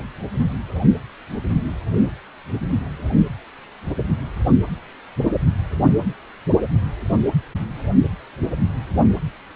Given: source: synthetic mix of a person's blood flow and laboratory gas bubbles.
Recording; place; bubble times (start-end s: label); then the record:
Doppler ultrasound of blood flow; precordium
no bubbles
From the record:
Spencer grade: 0 (complete lack of bubble signals)